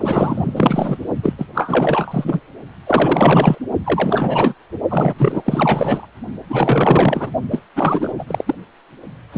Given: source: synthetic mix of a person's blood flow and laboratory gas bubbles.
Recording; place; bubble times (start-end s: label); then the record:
Doppler ultrasound of blood flow; precordium
0.00-0.99 s: bubbles
1.23-1.33 s: bubbles
1.38-1.47 s: bubbles
1.54-2.41 s: bubbles
2.86-3.58 s: bubbles
3.84-4.54 s: bubbles
4.88-5.14 s: bubbles
5.19-6.07 s: bubbles
6.49-7.30 s: bubbles
7.50-7.62 s: bubbles
7.75-8.13 s: bubbles
8.19-8.24 s: bubbles
8.27-8.55 s: bubbles
9.32-9.38 s: bubbles
From the record:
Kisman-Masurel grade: 444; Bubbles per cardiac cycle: continuous sound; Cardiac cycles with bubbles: 100%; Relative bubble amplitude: maximal (0.775 to 0.999); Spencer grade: 4 (maximum detectable bubble signal sounding continuously throughout systole and diastole of every cardiac period, and overriding the amplitude of the normal cardiac signals); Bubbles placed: only in the low amplitude regions of the cardiac cycle